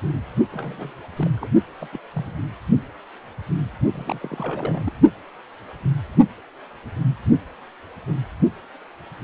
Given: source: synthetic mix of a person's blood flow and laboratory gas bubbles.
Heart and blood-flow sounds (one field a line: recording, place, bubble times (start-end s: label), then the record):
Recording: Doppler ultrasound of blood flow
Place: precordium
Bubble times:
0.52-0.93 s: bubbles
1.16-1.27 s: bubbles
1.33-1.48 s: bubbles
1.77-1.88 s: bubbles
1.92-1.98 s: bubbles
2.14-2.41 s: bubbles
3.93-4.83 s: bubbles
4.85-4.92 s: bubbles
From the record:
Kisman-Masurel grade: 221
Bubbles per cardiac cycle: several, 3 to 8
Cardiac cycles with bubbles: 10 to 50%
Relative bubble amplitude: barely perceptible (0.100 to 0.250)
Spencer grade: 2 (many but less than half of the cardiac periods contain bubble signals, singularly or in groups)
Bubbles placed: only in the low amplitude regions of the cardiac cycle